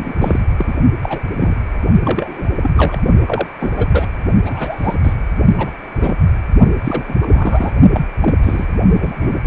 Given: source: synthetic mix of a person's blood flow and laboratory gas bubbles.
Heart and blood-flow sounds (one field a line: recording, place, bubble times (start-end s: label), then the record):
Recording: Doppler ultrasound of blood flow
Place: precordium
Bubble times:
0.00-0.16 s: bubbles
0.21-0.40 s: bubbles
0.58-0.75 s: bubbles
1.02-1.20 s: bubbles
1.39-1.60 s: bubbles
2.05-2.50 s: bubbles
2.62-2.71 s: bubbles
2.75-3.00 s: bubbles
3.26-3.48 s: bubbles
3.60-3.71 s: bubbles
3.76-3.87 s: bubbles
3.92-4.09 s: bubbles
4.45-4.96 s: bubbles
5.03-5.13 s: bubbles
5.58-5.71 s: bubbles
5.93-6.15 s: bubbles
6.83-7.04 s: bubbles
7.08-7.17 s: bubbles
7.22-7.73 s: bubbles
7.93-8.04 s: bubbles
8.20-8.35 s: bubbles
8.43-8.67 s: bubbles
8.94-9.38 s: bubbles
From the record:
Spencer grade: 3 (all of the cardiac periods contain showers or single bubble signals, but not dominating or overriding the cardiac motion signals)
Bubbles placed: only in the low amplitude regions of the cardiac cycle